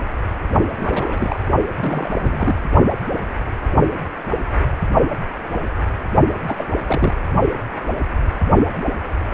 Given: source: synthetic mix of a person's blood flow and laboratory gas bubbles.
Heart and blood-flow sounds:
Doppler ultrasound of blood flow; precordium
0.78-1.44 s: bubbles
1.77-2.11 s: bubbles
2.19-2.58 s: bubbles
6.47-6.65 s: bubbles
6.88-7.13 s: bubbles
From the record:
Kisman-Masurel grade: 221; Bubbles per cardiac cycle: several, 3 to 8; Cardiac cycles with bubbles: 10 to 50%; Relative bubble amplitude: barely perceptible (0.100 to 0.250); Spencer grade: 2 (many but less than half of the cardiac periods contain bubble signals, singularly or in groups); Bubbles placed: only in the low amplitude regions of the cardiac cycle

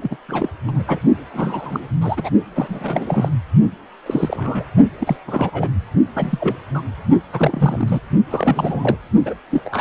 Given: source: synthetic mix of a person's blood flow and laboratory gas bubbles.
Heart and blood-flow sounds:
Doppler ultrasound of blood flow; precordium
0.02-0.16 s: bubbles
0.28-0.49 s: bubbles
0.67-0.83 s: bubbles
0.87-0.98 s: bubbles
1.33-1.90 s: bubbles
2.00-2.29 s: bubbles
2.55-3.31 s: bubbles
4.06-4.65 s: bubbles
5.00-5.17 s: bubbles
5.27-5.69 s: bubbles
6.16-6.58 s: bubbles
6.74-6.83 s: bubbles
7.33-8.01 s: bubbles
8.30-8.97 s: bubbles
9.25-9.33 s: bubbles
9.50-9.61 s: bubbles
9.64-9.81 s: bubbles
From the record:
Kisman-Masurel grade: 342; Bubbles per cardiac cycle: rolling drumbeat, 9 or more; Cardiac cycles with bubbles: 100%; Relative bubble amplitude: moderate (0.250 to 0.450); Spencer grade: 3 (all of the cardiac periods contain showers or single bubble signals, but not dominating or overriding the cardiac motion signals); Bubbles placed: only in the low amplitude regions of the cardiac cycle

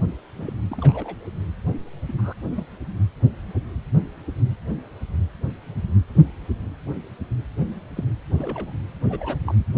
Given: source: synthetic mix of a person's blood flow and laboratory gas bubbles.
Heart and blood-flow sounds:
Doppler ultrasound of blood flow; precordium
0.38-0.53 s: bubbles
0.70-1.16 s: bubbles
2.07-2.13 s: bubbles
2.18-2.33 s: bubbles
2.56-2.67 s: bubbles
3.93-3.99 s: bubbles
7.96-8.04 s: bubbles
8.38-8.72 s: bubbles
9.09-9.38 s: bubbles
9.46-9.54 s: bubbles
From the record:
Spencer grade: 2 (many but less than half of the cardiac periods contain bubble signals, singularly or in groups); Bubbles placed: anywhere in the cardiac cycle

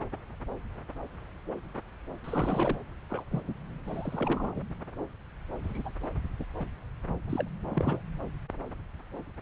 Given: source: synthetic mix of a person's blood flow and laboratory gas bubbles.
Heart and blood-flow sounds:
Doppler ultrasound of blood flow; subclavian vein
2.24-2.77 s: bubbles
3.10-3.24 s: bubbles
3.31-3.53 s: bubbles
3.88-4.62 s: bubbles
5.64-5.90 s: bubbles
6.03-6.08 s: bubbles
6.39-6.44 s: bubbles
6.59-6.66 s: bubbles
7.08-7.13 s: bubbles
7.29-7.47 s: bubbles
7.68-8.01 s: bubbles
From the record:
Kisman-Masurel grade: 221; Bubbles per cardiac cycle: several, 3 to 8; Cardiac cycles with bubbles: 10 to 50%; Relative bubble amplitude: barely perceptible (0.100 to 0.250); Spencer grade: 2 (many but less than half of the cardiac periods contain bubble signals, singularly or in groups); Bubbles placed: anywhere in the cardiac cycle

